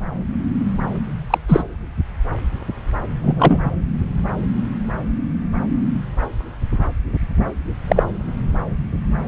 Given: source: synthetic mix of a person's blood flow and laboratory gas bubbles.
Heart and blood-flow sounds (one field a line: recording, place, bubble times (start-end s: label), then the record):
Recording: Doppler ultrasound of blood flow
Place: subclavian vein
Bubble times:
1.30-1.38 s: bubbles
1.48-1.64 s: bubbles
3.23-3.72 s: bubbles
7.88-8.03 s: bubbles
From the record:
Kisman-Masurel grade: 123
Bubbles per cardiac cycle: 1 to 2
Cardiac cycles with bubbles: 10 to 50%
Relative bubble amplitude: loud (0.450 to 0.775)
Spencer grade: 2 (many but less than half of the cardiac periods contain bubble signals, singularly or in groups)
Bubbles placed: anywhere in the cardiac cycle